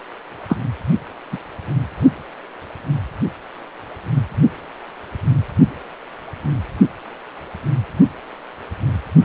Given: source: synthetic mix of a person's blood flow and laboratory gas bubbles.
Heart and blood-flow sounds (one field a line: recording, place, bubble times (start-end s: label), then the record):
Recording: Doppler ultrasound of blood flow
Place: precordium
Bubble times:
0.49-0.56 s: bubbles
1.32-1.38 s: bubbles
From the record:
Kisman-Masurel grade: 113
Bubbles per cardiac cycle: 1 to 2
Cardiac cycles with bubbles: 1 to 10%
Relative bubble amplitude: loud (0.450 to 0.775)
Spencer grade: 1 (occasional bubble signal discernible with the cardiac motion signal, with majority of cardiac periods free of bubbles)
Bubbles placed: only in the low amplitude regions of the cardiac cycle